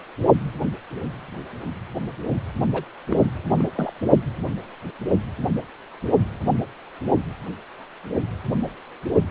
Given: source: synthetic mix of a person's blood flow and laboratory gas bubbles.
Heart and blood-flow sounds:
Doppler ultrasound of blood flow; precordium
2.74-2.83 s: bubbles
3.09-3.25 s: bubbles
3.50-3.64 s: bubbles
3.75-3.93 s: bubbles
From the record:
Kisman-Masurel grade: 211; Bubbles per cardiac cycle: several, 3 to 8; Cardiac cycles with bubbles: 1 to 10%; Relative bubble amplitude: barely perceptible (0.100 to 0.250); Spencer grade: 1 (occasional bubble signal discernible with the cardiac motion signal, with majority of cardiac periods free of bubbles); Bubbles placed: only in the low amplitude regions of the cardiac cycle

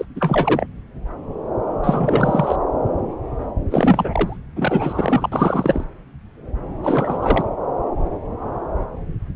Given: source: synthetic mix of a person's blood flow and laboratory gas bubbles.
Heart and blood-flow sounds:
Doppler ultrasound of blood flow; subclavian vein
0.00-0.05 s: bubbles
0.15-0.66 s: bubbles
1.84-2.56 s: bubbles
3.71-4.38 s: bubbles
4.56-5.84 s: bubbles
6.83-7.45 s: bubbles
From the record:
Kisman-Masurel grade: 332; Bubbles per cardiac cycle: rolling drumbeat, 9 or more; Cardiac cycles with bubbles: 50 to 99%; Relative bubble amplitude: moderate (0.250 to 0.450); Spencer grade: 3 (all of the cardiac periods contain showers or single bubble signals, but not dominating or overriding the cardiac motion signals); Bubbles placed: anywhere in the cardiac cycle

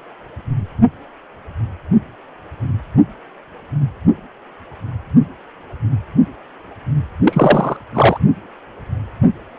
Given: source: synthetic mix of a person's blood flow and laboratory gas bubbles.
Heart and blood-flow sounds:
Doppler ultrasound of blood flow; precordium
7.25-7.77 s: bubbles
7.94-8.18 s: bubbles
From the record:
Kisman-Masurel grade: 213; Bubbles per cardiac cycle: several, 3 to 8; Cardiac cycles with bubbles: 1 to 10%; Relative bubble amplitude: loud (0.450 to 0.775); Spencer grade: 1 (occasional bubble signal discernible with the cardiac motion signal, with majority of cardiac periods free of bubbles); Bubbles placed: only in the low amplitude regions of the cardiac cycle

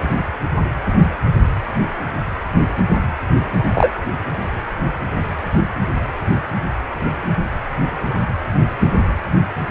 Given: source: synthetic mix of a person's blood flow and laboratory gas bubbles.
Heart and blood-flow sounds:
Doppler ultrasound of blood flow; precordium
3.73-3.92 s: bubbles
From the record:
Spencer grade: 1 (occasional bubble signal discernible with the cardiac motion signal, with majority of cardiac periods free of bubbles); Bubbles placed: anywhere in the cardiac cycle

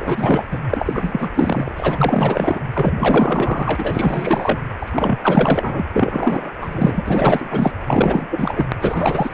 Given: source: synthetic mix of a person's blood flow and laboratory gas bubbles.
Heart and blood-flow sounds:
Doppler ultrasound of blood flow; precordium
0.00-0.46 s: bubbles
0.51-0.58 s: bubbles
0.71-1.30 s: bubbles
1.34-1.72 s: bubbles
1.76-2.61 s: bubbles
2.73-2.93 s: bubbles
2.97-4.60 s: bubbles
4.79-5.88 s: bubbles
5.92-6.53 s: bubbles
6.62-7.03 s: bubbles
7.05-7.72 s: bubbles
7.88-8.66 s: bubbles
8.81-9.34 s: bubbles
From the record:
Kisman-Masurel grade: 444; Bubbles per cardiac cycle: continuous sound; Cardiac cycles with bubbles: 100%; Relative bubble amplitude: maximal (0.775 to 0.999); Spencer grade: 4 (maximum detectable bubble signal sounding continuously throughout systole and diastole of every cardiac period, and overriding the amplitude of the normal cardiac signals); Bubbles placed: anywhere in the cardiac cycle

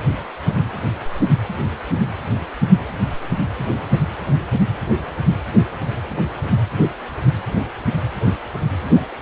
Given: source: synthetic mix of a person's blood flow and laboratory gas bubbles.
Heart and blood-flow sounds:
Doppler ultrasound of blood flow; precordium
8.96-9.02 s: bubbles
From the record:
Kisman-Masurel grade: 112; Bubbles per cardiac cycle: 1 to 2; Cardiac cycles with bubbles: 1 to 10%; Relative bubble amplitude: moderate (0.250 to 0.450); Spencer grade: 1 (occasional bubble signal discernible with the cardiac motion signal, with majority of cardiac periods free of bubbles); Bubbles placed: anywhere in the cardiac cycle

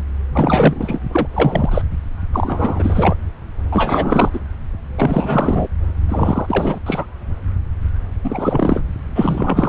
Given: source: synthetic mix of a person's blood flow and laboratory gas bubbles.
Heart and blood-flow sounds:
Doppler ultrasound of blood flow; subclavian vein
0.33-0.99 s: bubbles
1.11-1.27 s: bubbles
1.33-1.82 s: bubbles
2.33-3.16 s: bubbles
3.72-4.29 s: bubbles
4.33-4.39 s: bubbles
4.97-5.67 s: bubbles
6.08-6.79 s: bubbles
6.86-7.05 s: bubbles
8.24-8.83 s: bubbles
9.15-9.69 s: bubbles
From the record:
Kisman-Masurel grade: 333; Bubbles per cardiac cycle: rolling drumbeat, 9 or more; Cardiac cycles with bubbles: 50 to 99%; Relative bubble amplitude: loud (0.450 to 0.775); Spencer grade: 3 (all of the cardiac periods contain showers or single bubble signals, but not dominating or overriding the cardiac motion signals); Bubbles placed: anywhere in the cardiac cycle

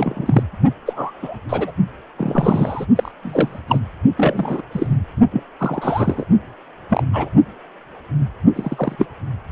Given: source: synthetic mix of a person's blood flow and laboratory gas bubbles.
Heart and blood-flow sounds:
Doppler ultrasound of blood flow; precordium
0.00-0.43 s: bubbles
0.86-1.38 s: bubbles
1.49-1.72 s: bubbles
2.17-2.86 s: bubbles
2.96-3.12 s: bubbles
3.23-3.62 s: bubbles
3.68-3.79 s: bubbles
4.17-4.62 s: bubbles
4.71-4.98 s: bubbles
5.31-5.43 s: bubbles
5.59-6.25 s: bubbles
6.90-7.03 s: bubbles
7.13-7.29 s: bubbles
8.55-8.96 s: bubbles
8.98-9.06 s: bubbles
From the record:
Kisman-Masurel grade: 242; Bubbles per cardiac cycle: several, 3 to 8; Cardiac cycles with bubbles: 100%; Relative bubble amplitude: moderate (0.250 to 0.450); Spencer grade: 3 (all of the cardiac periods contain showers or single bubble signals, but not dominating or overriding the cardiac motion signals); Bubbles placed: only in the low amplitude regions of the cardiac cycle

